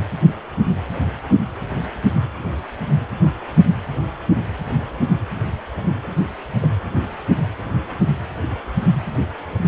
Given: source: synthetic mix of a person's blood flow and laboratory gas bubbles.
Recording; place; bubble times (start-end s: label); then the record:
Doppler ultrasound of blood flow; precordium
6.62-6.67 s: bubbles
From the record:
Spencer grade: 1 (occasional bubble signal discernible with the cardiac motion signal, with majority of cardiac periods free of bubbles); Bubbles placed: anywhere in the cardiac cycle